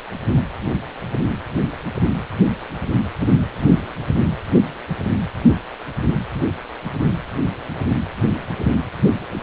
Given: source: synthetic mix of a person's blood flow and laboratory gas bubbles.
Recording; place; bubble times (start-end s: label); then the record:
Doppler ultrasound of blood flow; precordium
no bubbles
From the record:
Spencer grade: 0 (complete lack of bubble signals)